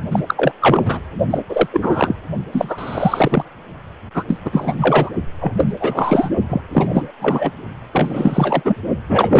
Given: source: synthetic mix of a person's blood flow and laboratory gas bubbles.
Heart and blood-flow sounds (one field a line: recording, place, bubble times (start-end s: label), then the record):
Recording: Doppler ultrasound of blood flow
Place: precordium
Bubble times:
0.00-0.02 s: bubbles
0.10-0.23 s: bubbles
0.27-0.52 s: bubbles
0.60-1.00 s: bubbles
1.30-1.38 s: bubbles
1.49-1.67 s: bubbles
1.71-2.16 s: bubbles
2.52-3.44 s: bubbles
4.14-4.24 s: bubbles
4.28-4.38 s: bubbles
4.45-4.75 s: bubbles
4.78-5.10 s: bubbles
5.41-5.53 s: bubbles
5.57-5.74 s: bubbles
5.79-6.29 s: bubbles
6.49-6.62 s: bubbles
6.72-7.11 s: bubbles
7.21-7.52 s: bubbles
7.92-8.77 s: bubbles
9.08-9.40 s: bubbles
From the record:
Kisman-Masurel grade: 343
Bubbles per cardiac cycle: rolling drumbeat, 9 or more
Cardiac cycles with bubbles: 100%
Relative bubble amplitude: loud (0.450 to 0.775)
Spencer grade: 3 (all of the cardiac periods contain showers or single bubble signals, but not dominating or overriding the cardiac motion signals)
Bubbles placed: only in the low amplitude regions of the cardiac cycle